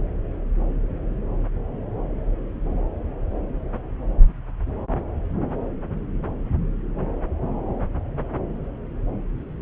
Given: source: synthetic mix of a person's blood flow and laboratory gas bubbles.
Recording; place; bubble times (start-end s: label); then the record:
Doppler ultrasound of blood flow; subclavian vein
no bubbles
From the record:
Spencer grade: 0 (complete lack of bubble signals)